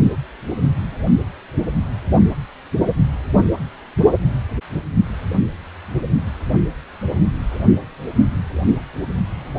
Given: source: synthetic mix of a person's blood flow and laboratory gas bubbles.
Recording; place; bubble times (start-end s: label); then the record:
Doppler ultrasound of blood flow; precordium
7.51-7.62 s: bubbles
From the record:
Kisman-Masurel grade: 121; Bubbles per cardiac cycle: 1 to 2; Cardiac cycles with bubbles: 10 to 50%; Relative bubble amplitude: barely perceptible (0.100 to 0.250); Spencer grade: 2 (many but less than half of the cardiac periods contain bubble signals, singularly or in groups); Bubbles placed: only in the low amplitude regions of the cardiac cycle